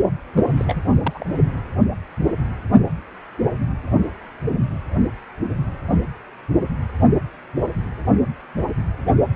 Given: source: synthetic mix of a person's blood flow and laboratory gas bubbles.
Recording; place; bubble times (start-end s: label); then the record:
Doppler ultrasound of blood flow; precordium
0.35-0.45 s: bubbles
0.57-0.82 s: bubbles
0.91-0.98 s: bubbles
1.05-1.26 s: bubbles
From the record:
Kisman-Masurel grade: 221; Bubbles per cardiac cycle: several, 3 to 8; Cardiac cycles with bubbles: 10 to 50%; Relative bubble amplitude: barely perceptible (0.100 to 0.250); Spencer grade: 2 (many but less than half of the cardiac periods contain bubble signals, singularly or in groups); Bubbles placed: only in the low amplitude regions of the cardiac cycle